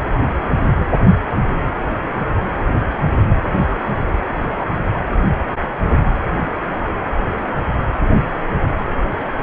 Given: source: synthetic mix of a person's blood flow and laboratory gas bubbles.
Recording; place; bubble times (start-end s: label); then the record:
Doppler ultrasound of blood flow; precordium
1.05-1.15 s: bubbles
1.30-1.37 s: bubbles
From the record:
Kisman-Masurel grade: 111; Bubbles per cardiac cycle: 1 to 2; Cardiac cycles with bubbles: 1 to 10%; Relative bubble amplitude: barely perceptible (0.100 to 0.250); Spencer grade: 1 (occasional bubble signal discernible with the cardiac motion signal, with majority of cardiac periods free of bubbles); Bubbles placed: anywhere in the cardiac cycle